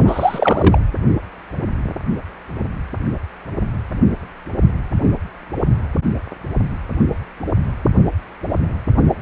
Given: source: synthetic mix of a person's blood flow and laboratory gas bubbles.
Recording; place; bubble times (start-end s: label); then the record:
Doppler ultrasound of blood flow; precordium
0.00-0.79 s: bubbles
From the record:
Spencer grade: 1 (occasional bubble signal discernible with the cardiac motion signal, with majority of cardiac periods free of bubbles); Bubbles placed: anywhere in the cardiac cycle